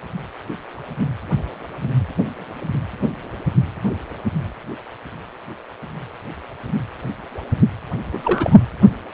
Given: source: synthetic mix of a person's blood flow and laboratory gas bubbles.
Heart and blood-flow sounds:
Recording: Doppler ultrasound of blood flow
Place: precordium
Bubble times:
8.12-8.61 s: bubbles
From the record:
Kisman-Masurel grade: 212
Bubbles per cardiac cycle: several, 3 to 8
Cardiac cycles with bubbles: 1 to 10%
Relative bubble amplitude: moderate (0.250 to 0.450)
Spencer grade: 1 (occasional bubble signal discernible with the cardiac motion signal, with majority of cardiac periods free of bubbles)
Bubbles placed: anywhere in the cardiac cycle

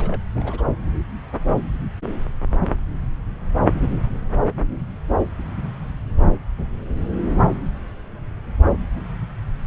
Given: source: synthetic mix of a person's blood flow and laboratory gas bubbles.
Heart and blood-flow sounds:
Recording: Doppler ultrasound of blood flow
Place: subclavian vein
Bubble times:
0.00-0.21 s: bubbles
0.34-0.62 s: bubbles
From the record:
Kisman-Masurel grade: 211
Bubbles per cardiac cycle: several, 3 to 8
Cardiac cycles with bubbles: 1 to 10%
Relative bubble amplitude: barely perceptible (0.100 to 0.250)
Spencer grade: 1 (occasional bubble signal discernible with the cardiac motion signal, with majority of cardiac periods free of bubbles)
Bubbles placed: anywhere in the cardiac cycle

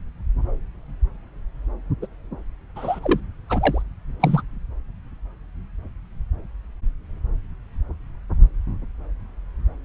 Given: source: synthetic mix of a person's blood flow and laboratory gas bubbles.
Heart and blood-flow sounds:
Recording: Doppler ultrasound of blood flow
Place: subclavian vein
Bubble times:
2.02-2.06 s: bubbles
2.76-3.00 s: bubbles
3.02-3.20 s: bubbles
3.48-3.83 s: bubbles
4.20-4.42 s: bubbles
From the record:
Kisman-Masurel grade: 222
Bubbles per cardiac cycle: several, 3 to 8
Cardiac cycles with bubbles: 10 to 50%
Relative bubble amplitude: moderate (0.250 to 0.450)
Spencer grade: 2 (many but less than half of the cardiac periods contain bubble signals, singularly or in groups)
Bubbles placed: anywhere in the cardiac cycle

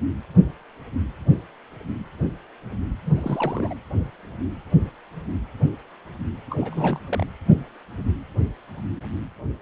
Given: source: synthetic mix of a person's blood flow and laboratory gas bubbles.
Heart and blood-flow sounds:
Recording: Doppler ultrasound of blood flow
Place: precordium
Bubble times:
3.06-3.11 s: bubbles
3.17-3.74 s: bubbles
6.50-7.00 s: bubbles
7.07-7.27 s: bubbles
From the record:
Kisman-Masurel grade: 221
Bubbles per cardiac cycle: several, 3 to 8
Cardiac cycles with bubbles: 10 to 50%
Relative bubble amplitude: barely perceptible (0.100 to 0.250)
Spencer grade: 2 (many but less than half of the cardiac periods contain bubble signals, singularly or in groups)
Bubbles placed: anywhere in the cardiac cycle

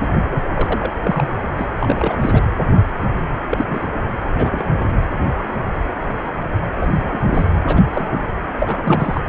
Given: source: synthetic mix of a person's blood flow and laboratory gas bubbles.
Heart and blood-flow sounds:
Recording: Doppler ultrasound of blood flow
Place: precordium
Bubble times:
0.29-0.44 s: bubbles
0.55-0.91 s: bubbles
1.03-1.30 s: bubbles
1.56-1.66 s: bubbles
1.79-2.42 s: bubbles
3.51-3.65 s: bubbles
3.67-3.87 s: bubbles
4.36-4.84 s: bubbles
6.81-6.93 s: bubbles
6.96-7.48 s: bubbles
7.67-7.83 s: bubbles
7.89-8.18 s: bubbles
8.58-9.21 s: bubbles
From the record:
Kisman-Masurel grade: 232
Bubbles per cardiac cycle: several, 3 to 8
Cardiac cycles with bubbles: 50 to 99%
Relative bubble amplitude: moderate (0.250 to 0.450)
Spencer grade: 3 (all of the cardiac periods contain showers or single bubble signals, but not dominating or overriding the cardiac motion signals)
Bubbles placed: anywhere in the cardiac cycle

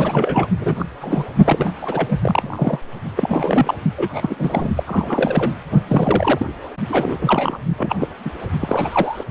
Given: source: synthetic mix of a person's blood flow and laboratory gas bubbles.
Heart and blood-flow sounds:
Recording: Doppler ultrasound of blood flow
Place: precordium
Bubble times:
0.00-0.47 s: bubbles
0.59-0.85 s: bubbles
1.01-1.25 s: bubbles
1.45-1.72 s: bubbles
1.82-2.18 s: bubbles
2.21-2.80 s: bubbles
3.16-3.75 s: bubbles
3.97-4.69 s: bubbles
4.75-4.83 s: bubbles
4.87-5.51 s: bubbles
5.88-6.46 s: bubbles
6.89-7.58 s: bubbles
7.78-7.96 s: bubbles
7.99-8.08 s: bubbles
8.24-8.30 s: bubbles
8.60-9.24 s: bubbles
From the record:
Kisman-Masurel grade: 242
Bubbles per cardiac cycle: several, 3 to 8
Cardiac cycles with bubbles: 100%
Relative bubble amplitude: moderate (0.250 to 0.450)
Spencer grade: 3 (all of the cardiac periods contain showers or single bubble signals, but not dominating or overriding the cardiac motion signals)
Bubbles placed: only in the low amplitude regions of the cardiac cycle

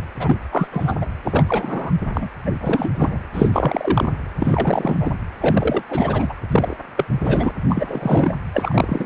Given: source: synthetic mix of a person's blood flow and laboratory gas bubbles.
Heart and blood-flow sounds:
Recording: Doppler ultrasound of blood flow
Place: precordium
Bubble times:
0.20-0.39 s: bubbles
0.52-0.67 s: bubbles
0.71-0.97 s: bubbles
1.01-1.06 s: bubbles
1.24-1.91 s: bubbles
2.13-2.30 s: bubbles
2.46-2.51 s: bubbles
2.61-2.91 s: bubbles
2.94-3.20 s: bubbles
3.34-4.10 s: bubbles
4.39-4.96 s: bubbles
5.00-5.12 s: bubbles
5.40-5.83 s: bubbles
5.89-6.33 s: bubbles
6.52-6.77 s: bubbles
6.96-7.06 s: bubbles
7.21-7.51 s: bubbles
7.68-8.33 s: bubbles
8.53-9.06 s: bubbles
From the record:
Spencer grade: 3 (all of the cardiac periods contain showers or single bubble signals, but not dominating or overriding the cardiac motion signals)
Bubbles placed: anywhere in the cardiac cycle

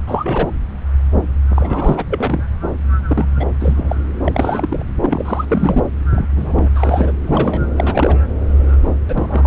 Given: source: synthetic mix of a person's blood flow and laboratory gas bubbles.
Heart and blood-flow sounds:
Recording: Doppler ultrasound of blood flow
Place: subclavian vein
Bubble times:
0.07-0.50 s: bubbles
1.49-2.06 s: bubbles
2.10-2.43 s: bubbles
3.07-3.32 s: bubbles
3.37-3.46 s: bubbles
3.60-3.96 s: bubbles
4.24-4.83 s: bubbles
5.01-5.45 s: bubbles
5.47-5.84 s: bubbles
6.13-6.26 s: bubbles
6.35-6.69 s: bubbles
6.75-7.13 s: bubbles
7.26-7.60 s: bubbles
7.76-8.19 s: bubbles
9.08-9.47 s: bubbles
From the record:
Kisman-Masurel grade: 232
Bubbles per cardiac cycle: several, 3 to 8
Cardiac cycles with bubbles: 50 to 99%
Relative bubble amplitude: moderate (0.250 to 0.450)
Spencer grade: 3 (all of the cardiac periods contain showers or single bubble signals, but not dominating or overriding the cardiac motion signals)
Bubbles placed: anywhere in the cardiac cycle

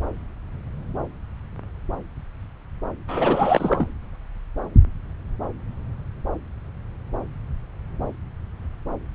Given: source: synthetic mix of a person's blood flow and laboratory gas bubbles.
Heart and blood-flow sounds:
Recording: Doppler ultrasound of blood flow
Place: subclavian vein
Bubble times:
3.08-3.87 s: bubbles
From the record:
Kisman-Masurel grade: 213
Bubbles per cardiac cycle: several, 3 to 8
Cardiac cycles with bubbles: 1 to 10%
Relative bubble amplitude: loud (0.450 to 0.775)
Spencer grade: 1 (occasional bubble signal discernible with the cardiac motion signal, with majority of cardiac periods free of bubbles)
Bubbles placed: anywhere in the cardiac cycle

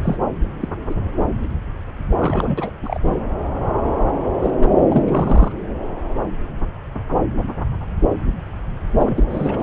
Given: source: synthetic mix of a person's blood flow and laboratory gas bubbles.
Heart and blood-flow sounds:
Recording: Doppler ultrasound of blood flow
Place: subclavian vein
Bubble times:
0.03-0.17 s: bubbles
0.61-0.68 s: bubbles
0.89-0.94 s: bubbles
2.19-2.72 s: bubbles
2.83-2.99 s: bubbles
3.03-3.14 s: bubbles
4.42-4.50 s: bubbles
4.62-4.69 s: bubbles
4.90-5.03 s: bubbles
5.08-5.52 s: bubbles
8.98-9.24 s: bubbles
9.29-9.63 s: bubbles
From the record:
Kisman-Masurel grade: 232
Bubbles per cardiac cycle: several, 3 to 8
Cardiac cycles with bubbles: 50 to 99%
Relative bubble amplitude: moderate (0.250 to 0.450)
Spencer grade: 3 (all of the cardiac periods contain showers or single bubble signals, but not dominating or overriding the cardiac motion signals)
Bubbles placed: anywhere in the cardiac cycle

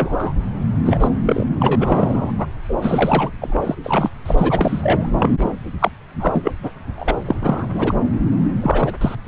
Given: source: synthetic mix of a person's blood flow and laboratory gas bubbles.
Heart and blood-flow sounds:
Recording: Doppler ultrasound of blood flow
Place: subclavian vein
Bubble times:
0.00-0.33 s: bubbles
0.85-1.07 s: bubbles
1.26-1.45 s: bubbles
1.59-2.32 s: bubbles
2.38-2.46 s: bubbles
2.68-2.74 s: bubbles
2.82-3.30 s: bubbles
3.41-3.75 s: bubbles
3.83-4.09 s: bubbles
4.25-5.06 s: bubbles
5.21-5.35 s: bubbles
5.38-5.48 s: bubbles
5.79-5.90 s: bubbles
6.20-6.52 s: bubbles
6.63-6.71 s: bubbles
6.98-7.18 s: bubbles
7.25-7.36 s: bubbles
7.41-7.67 s: bubbles
7.74-7.94 s: bubbles
8.62-8.92 s: bubbles
9.01-9.15 s: bubbles
9.24-9.28 s: bubbles
From the record:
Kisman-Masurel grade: 243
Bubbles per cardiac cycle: several, 3 to 8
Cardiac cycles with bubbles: 100%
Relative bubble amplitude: loud (0.450 to 0.775)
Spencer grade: 3 (all of the cardiac periods contain showers or single bubble signals, but not dominating or overriding the cardiac motion signals)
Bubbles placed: anywhere in the cardiac cycle

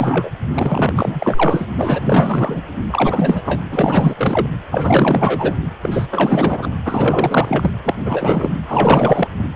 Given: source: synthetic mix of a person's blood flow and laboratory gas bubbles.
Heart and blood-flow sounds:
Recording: Doppler ultrasound of blood flow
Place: precordium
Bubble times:
0.00-0.30 s: bubbles
0.53-1.67 s: bubbles
1.75-2.61 s: bubbles
2.90-3.63 s: bubbles
3.71-4.15 s: bubbles
4.17-4.46 s: bubbles
4.71-5.56 s: bubbles
5.83-6.07 s: bubbles
6.10-6.71 s: bubbles
6.85-7.71 s: bubbles
7.83-7.94 s: bubbles
8.00-8.50 s: bubbles
8.68-9.28 s: bubbles
From the record:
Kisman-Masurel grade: 444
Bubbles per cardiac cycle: continuous sound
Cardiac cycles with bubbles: 100%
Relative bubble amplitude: maximal (0.775 to 0.999)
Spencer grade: 4 (maximum detectable bubble signal sounding continuously throughout systole and diastole of every cardiac period, and overriding the amplitude of the normal cardiac signals)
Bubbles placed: anywhere in the cardiac cycle

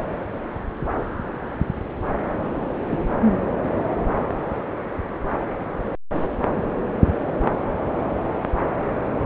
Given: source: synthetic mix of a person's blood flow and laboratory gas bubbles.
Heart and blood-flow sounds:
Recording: Doppler ultrasound of blood flow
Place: subclavian vein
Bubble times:
2.90-3.09 s: bubbles
From the record:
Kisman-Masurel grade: 112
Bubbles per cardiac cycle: 1 to 2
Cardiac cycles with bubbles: 1 to 10%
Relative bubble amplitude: moderate (0.250 to 0.450)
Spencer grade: 1 (occasional bubble signal discernible with the cardiac motion signal, with majority of cardiac periods free of bubbles)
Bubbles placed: anywhere in the cardiac cycle

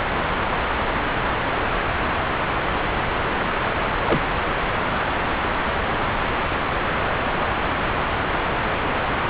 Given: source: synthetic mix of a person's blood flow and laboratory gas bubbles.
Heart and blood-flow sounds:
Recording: Doppler ultrasound of blood flow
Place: subclavian vein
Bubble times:
4.05-4.21 s: bubbles
From the record:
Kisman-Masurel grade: 122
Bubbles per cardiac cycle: 1 to 2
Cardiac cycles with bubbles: 10 to 50%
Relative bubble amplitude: moderate (0.250 to 0.450)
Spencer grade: 2 (many but less than half of the cardiac periods contain bubble signals, singularly or in groups)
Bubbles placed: anywhere in the cardiac cycle

